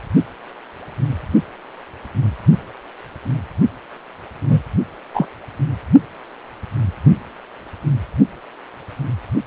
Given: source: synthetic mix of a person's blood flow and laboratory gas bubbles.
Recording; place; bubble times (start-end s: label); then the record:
Doppler ultrasound of blood flow; precordium
4.48-4.63 s: bubbles
5.14-5.26 s: bubbles
From the record:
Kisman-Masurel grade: 123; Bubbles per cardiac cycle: 1 to 2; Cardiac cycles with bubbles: 10 to 50%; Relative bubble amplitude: loud (0.450 to 0.775); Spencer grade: 2 (many but less than half of the cardiac periods contain bubble signals, singularly or in groups); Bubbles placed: only in the low amplitude regions of the cardiac cycle